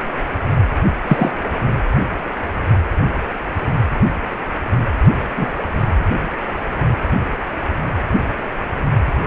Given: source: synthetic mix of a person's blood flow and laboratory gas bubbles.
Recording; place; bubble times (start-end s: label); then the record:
Doppler ultrasound of blood flow; precordium
1.08-1.31 s: bubbles
5.36-5.46 s: bubbles
From the record:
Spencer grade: 2 (many but less than half of the cardiac periods contain bubble signals, singularly or in groups); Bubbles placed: anywhere in the cardiac cycle